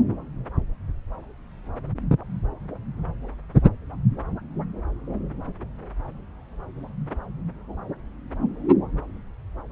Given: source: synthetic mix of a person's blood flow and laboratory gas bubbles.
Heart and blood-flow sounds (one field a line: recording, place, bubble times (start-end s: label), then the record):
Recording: Doppler ultrasound of blood flow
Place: subclavian vein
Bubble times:
no bubbles
From the record:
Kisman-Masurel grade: 000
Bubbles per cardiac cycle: 0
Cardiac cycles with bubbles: 0%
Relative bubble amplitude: no bubbles discernible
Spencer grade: 0 (complete lack of bubble signals)